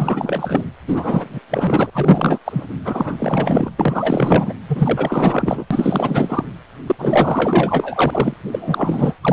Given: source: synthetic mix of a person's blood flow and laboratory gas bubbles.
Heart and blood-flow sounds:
Doppler ultrasound of blood flow; precordium
0.00-0.70 s: bubbles
0.87-1.40 s: bubbles
1.50-1.90 s: bubbles
1.93-2.39 s: bubbles
2.44-2.67 s: bubbles
2.85-3.71 s: bubbles
3.79-4.53 s: bubbles
4.68-5.65 s: bubbles
5.70-6.44 s: bubbles
6.86-6.95 s: bubbles
6.98-8.34 s: bubbles
8.52-9.17 s: bubbles
9.24-9.33 s: bubbles
From the record:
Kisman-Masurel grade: 444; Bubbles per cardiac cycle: continuous sound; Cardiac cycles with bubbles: 100%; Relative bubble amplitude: maximal (0.775 to 0.999); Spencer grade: 4 (maximum detectable bubble signal sounding continuously throughout systole and diastole of every cardiac period, and overriding the amplitude of the normal cardiac signals); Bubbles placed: anywhere in the cardiac cycle

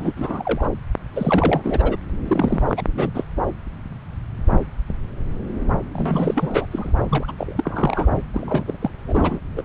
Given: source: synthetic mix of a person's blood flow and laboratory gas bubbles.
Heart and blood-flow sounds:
Doppler ultrasound of blood flow; subclavian vein
0.00-0.13 s: bubbles
0.16-0.69 s: bubbles
1.15-1.97 s: bubbles
2.27-2.62 s: bubbles
2.69-2.83 s: bubbles
2.90-3.10 s: bubbles
3.15-3.24 s: bubbles
5.92-6.66 s: bubbles
6.71-6.92 s: bubbles
7.10-7.32 s: bubbles
7.38-8.09 s: bubbles
8.33-8.63 s: bubbles
8.67-8.78 s: bubbles
8.81-8.90 s: bubbles
9.07-9.39 s: bubbles
9.56-9.62 s: bubbles
From the record:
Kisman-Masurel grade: 332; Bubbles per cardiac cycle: rolling drumbeat, 9 or more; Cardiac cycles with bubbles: 50 to 99%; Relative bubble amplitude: moderate (0.250 to 0.450); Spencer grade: 3 (all of the cardiac periods contain showers or single bubble signals, but not dominating or overriding the cardiac motion signals); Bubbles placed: anywhere in the cardiac cycle

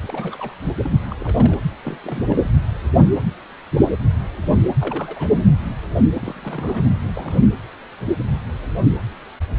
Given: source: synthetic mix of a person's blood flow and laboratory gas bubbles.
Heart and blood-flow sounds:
Doppler ultrasound of blood flow; precordium
0.02-0.54 s: bubbles
0.83-0.90 s: bubbles
1.10-1.16 s: bubbles
1.20-1.59 s: bubbles
1.82-1.97 s: bubbles
2.04-2.26 s: bubbles
2.30-2.51 s: bubbles
4.79-5.42 s: bubbles
6.21-6.86 s: bubbles
6.96-7.00 s: bubbles
7.04-7.42 s: bubbles
From the record:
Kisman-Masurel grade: 221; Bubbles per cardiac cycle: several, 3 to 8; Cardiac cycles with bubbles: 10 to 50%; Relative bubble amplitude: barely perceptible (0.100 to 0.250); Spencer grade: 2 (many but less than half of the cardiac periods contain bubble signals, singularly or in groups); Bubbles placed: anywhere in the cardiac cycle

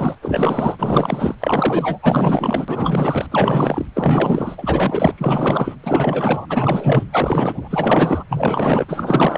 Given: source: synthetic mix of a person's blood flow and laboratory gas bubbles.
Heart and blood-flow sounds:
Doppler ultrasound of blood flow; precordium
0.00-0.15 s: bubbles
0.22-1.35 s: bubbles
1.40-1.98 s: bubbles
2.02-3.26 s: bubbles
3.31-3.85 s: bubbles
3.94-5.14 s: bubbles
5.17-5.75 s: bubbles
5.83-6.46 s: bubbles
6.49-7.09 s: bubbles
7.12-8.23 s: bubbles
8.28-8.85 s: bubbles
8.88-9.38 s: bubbles
From the record:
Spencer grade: 4 (maximum detectable bubble signal sounding continuously throughout systole and diastole of every cardiac period, and overriding the amplitude of the normal cardiac signals); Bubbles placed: anywhere in the cardiac cycle

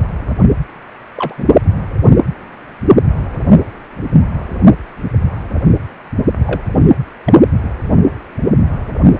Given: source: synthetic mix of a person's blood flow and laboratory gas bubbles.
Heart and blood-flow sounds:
Doppler ultrasound of blood flow; precordium
1.17-1.34 s: bubbles
1.37-1.46 s: bubbles
6.46-6.61 s: bubbles
7.26-7.33 s: bubbles
From the record:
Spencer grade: 2 (many but less than half of the cardiac periods contain bubble signals, singularly or in groups); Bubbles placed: anywhere in the cardiac cycle

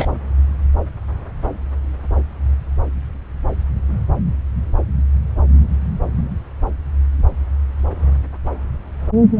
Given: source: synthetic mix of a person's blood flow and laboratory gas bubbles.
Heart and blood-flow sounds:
Doppler ultrasound of blood flow; subclavian vein
0.00-0.06 s: bubbles
From the record:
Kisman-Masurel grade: 213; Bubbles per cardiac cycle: several, 3 to 8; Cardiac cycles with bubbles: 1 to 10%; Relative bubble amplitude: loud (0.450 to 0.775); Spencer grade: 1 (occasional bubble signal discernible with the cardiac motion signal, with majority of cardiac periods free of bubbles); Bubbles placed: anywhere in the cardiac cycle

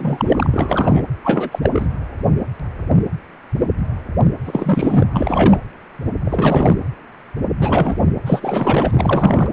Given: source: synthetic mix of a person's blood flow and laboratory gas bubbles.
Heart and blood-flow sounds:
Doppler ultrasound of blood flow; precordium
0.00-0.47 s: bubbles
0.51-1.02 s: bubbles
1.24-1.59 s: bubbles
1.62-1.87 s: bubbles
4.45-5.07 s: bubbles
5.13-5.59 s: bubbles
6.25-6.76 s: bubbles
7.59-8.08 s: bubbles
8.25-9.49 s: bubbles
From the record:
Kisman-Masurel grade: 333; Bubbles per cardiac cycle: rolling drumbeat, 9 or more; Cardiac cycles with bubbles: 50 to 99%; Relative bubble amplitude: loud (0.450 to 0.775); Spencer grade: 3 (all of the cardiac periods contain showers or single bubble signals, but not dominating or overriding the cardiac motion signals); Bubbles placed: anywhere in the cardiac cycle

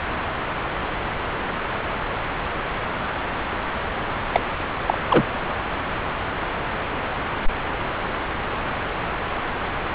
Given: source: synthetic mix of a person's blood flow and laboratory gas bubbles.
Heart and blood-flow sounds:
Doppler ultrasound of blood flow; subclavian vein
4.32-4.41 s: bubbles
4.87-4.98 s: bubbles
5.09-5.25 s: bubbles
From the record:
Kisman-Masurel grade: 223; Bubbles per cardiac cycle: several, 3 to 8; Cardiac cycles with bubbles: 10 to 50%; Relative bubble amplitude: loud (0.450 to 0.775); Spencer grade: 2 (many but less than half of the cardiac periods contain bubble signals, singularly or in groups); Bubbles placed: anywhere in the cardiac cycle

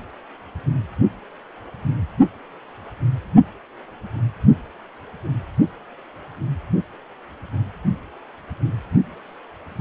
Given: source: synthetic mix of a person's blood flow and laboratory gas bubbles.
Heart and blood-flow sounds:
Doppler ultrasound of blood flow; precordium
no bubbles
From the record:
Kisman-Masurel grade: 000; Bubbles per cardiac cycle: 0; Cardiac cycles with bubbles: 0%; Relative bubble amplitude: no bubbles discernible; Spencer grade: 0 (complete lack of bubble signals)

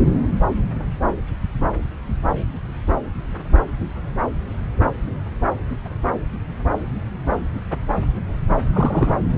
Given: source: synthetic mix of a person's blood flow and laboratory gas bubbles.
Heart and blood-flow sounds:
Doppler ultrasound of blood flow; subclavian vein
8.72-9.12 s: bubbles
From the record:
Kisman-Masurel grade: 122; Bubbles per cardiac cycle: 1 to 2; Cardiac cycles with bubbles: 10 to 50%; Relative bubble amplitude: moderate (0.250 to 0.450); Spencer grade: 2 (many but less than half of the cardiac periods contain bubble signals, singularly or in groups); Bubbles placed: anywhere in the cardiac cycle

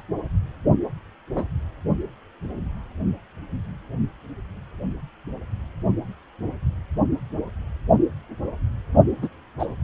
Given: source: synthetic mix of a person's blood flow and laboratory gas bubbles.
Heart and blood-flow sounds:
Doppler ultrasound of blood flow; precordium
1.35-1.44 s: bubbles
9.22-9.28 s: bubbles
9.59-9.67 s: bubbles
From the record:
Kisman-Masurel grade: 122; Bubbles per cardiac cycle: 1 to 2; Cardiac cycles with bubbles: 10 to 50%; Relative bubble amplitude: moderate (0.250 to 0.450); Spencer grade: 2 (many but less than half of the cardiac periods contain bubble signals, singularly or in groups); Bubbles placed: anywhere in the cardiac cycle

